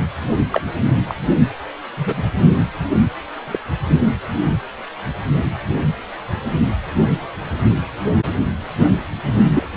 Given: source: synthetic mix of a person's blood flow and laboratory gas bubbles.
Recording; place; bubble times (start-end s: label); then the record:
Doppler ultrasound of blood flow; precordium
0.52-0.61 s: bubbles
1.07-1.15 s: bubbles
1.96-2.23 s: bubbles
3.48-3.59 s: bubbles
9.51-9.67 s: bubbles
From the record:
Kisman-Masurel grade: 122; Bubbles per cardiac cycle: 1 to 2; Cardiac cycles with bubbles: 10 to 50%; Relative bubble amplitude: moderate (0.250 to 0.450); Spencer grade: 2 (many but less than half of the cardiac periods contain bubble signals, singularly or in groups); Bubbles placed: only in the low amplitude regions of the cardiac cycle